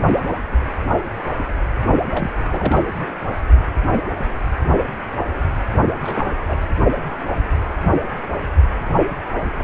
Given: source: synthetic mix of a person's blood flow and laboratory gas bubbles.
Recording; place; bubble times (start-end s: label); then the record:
Doppler ultrasound of blood flow; precordium
2.08-2.32 s: bubbles
2.50-2.81 s: bubbles
2.90-3.05 s: bubbles
3.28-3.35 s: bubbles
6.03-6.42 s: bubbles
6.47-6.60 s: bubbles
From the record:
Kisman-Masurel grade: 222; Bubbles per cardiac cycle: several, 3 to 8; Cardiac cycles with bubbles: 10 to 50%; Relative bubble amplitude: moderate (0.250 to 0.450); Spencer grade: 2 (many but less than half of the cardiac periods contain bubble signals, singularly or in groups); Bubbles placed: only in the low amplitude regions of the cardiac cycle